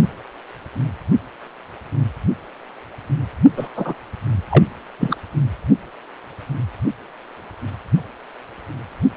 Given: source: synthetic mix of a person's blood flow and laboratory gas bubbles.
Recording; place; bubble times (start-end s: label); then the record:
Doppler ultrasound of blood flow; precordium
3.56-3.68 s: bubbles
3.75-3.95 s: bubbles
4.49-4.64 s: bubbles
5.00-5.17 s: bubbles
From the record:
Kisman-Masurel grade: 213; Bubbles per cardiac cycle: several, 3 to 8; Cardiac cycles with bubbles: 1 to 10%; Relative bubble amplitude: loud (0.450 to 0.775); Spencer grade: 1 (occasional bubble signal discernible with the cardiac motion signal, with majority of cardiac periods free of bubbles); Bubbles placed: only in the low amplitude regions of the cardiac cycle